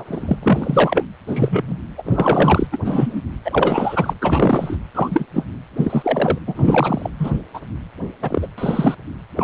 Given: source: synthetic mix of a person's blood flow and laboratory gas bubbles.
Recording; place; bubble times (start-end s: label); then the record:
Doppler ultrasound of blood flow; precordium
0.00-0.39 s: bubbles
0.42-1.04 s: bubbles
1.27-1.77 s: bubbles
1.98-2.02 s: bubbles
2.05-2.67 s: bubbles
2.72-2.77 s: bubbles
2.85-3.21 s: bubbles
3.44-4.14 s: bubbles
4.21-4.77 s: bubbles
4.94-5.26 s: bubbles
5.33-5.45 s: bubbles
5.77-6.39 s: bubbles
6.47-7.10 s: bubbles
7.20-7.39 s: bubbles
7.54-7.61 s: bubbles
8.22-8.47 s: bubbles
8.57-8.95 s: bubbles
9.37-9.44 s: bubbles
From the record:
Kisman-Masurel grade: 243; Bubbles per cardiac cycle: several, 3 to 8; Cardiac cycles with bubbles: 100%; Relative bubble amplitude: loud (0.450 to 0.775); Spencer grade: 3 (all of the cardiac periods contain showers or single bubble signals, but not dominating or overriding the cardiac motion signals); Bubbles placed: anywhere in the cardiac cycle